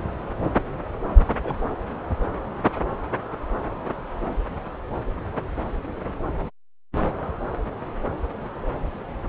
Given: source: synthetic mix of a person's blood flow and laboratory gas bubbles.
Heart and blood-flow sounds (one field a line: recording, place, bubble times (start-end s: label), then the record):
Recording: Doppler ultrasound of blood flow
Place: subclavian vein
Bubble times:
1.27-1.33 s: bubbles
1.43-1.60 s: bubbles
From the record:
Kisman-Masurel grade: 211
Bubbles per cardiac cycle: several, 3 to 8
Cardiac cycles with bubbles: 1 to 10%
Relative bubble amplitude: barely perceptible (0.100 to 0.250)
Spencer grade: 1 (occasional bubble signal discernible with the cardiac motion signal, with majority of cardiac periods free of bubbles)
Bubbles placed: anywhere in the cardiac cycle